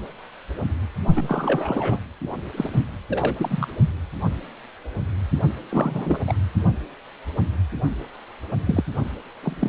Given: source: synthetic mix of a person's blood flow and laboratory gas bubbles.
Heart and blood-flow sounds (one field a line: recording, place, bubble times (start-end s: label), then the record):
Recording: Doppler ultrasound of blood flow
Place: precordium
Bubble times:
1.15-1.98 s: bubbles
2.57-2.70 s: bubbles
2.73-2.79 s: bubbles
3.10-3.35 s: bubbles
3.38-3.66 s: bubbles
5.69-6.20 s: bubbles
6.27-6.33 s: bubbles
8.67-8.83 s: bubbles
9.42-9.69 s: bubbles
From the record:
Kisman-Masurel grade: 232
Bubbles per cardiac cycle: several, 3 to 8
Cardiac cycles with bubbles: 50 to 99%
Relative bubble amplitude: moderate (0.250 to 0.450)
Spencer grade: 3 (all of the cardiac periods contain showers or single bubble signals, but not dominating or overriding the cardiac motion signals)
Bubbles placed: only in the low amplitude regions of the cardiac cycle